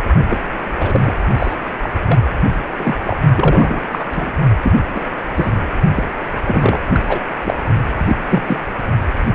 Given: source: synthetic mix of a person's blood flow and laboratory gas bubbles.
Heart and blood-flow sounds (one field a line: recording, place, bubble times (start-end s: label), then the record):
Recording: Doppler ultrasound of blood flow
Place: precordium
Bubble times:
0.31-0.38 s: bubbles
0.74-1.17 s: bubbles
1.38-1.53 s: bubbles
1.82-1.90 s: bubbles
2.06-2.19 s: bubbles
2.79-2.95 s: bubbles
3.04-3.17 s: bubbles
3.35-3.86 s: bubbles
3.91-4.08 s: bubbles
4.11-4.31 s: bubbles
4.62-4.72 s: bubbles
4.94-5.04 s: bubbles
5.35-5.52 s: bubbles
5.94-6.03 s: bubbles
6.45-6.79 s: bubbles
6.93-7.01 s: bubbles
7.08-7.19 s: bubbles
7.45-7.54 s: bubbles
7.98-8.17 s: bubbles
8.29-8.44 s: bubbles
8.46-8.57 s: bubbles
From the record:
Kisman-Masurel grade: 243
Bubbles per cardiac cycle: several, 3 to 8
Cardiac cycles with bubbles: 100%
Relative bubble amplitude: loud (0.450 to 0.775)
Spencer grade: 3 (all of the cardiac periods contain showers or single bubble signals, but not dominating or overriding the cardiac motion signals)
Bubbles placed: only in the low amplitude regions of the cardiac cycle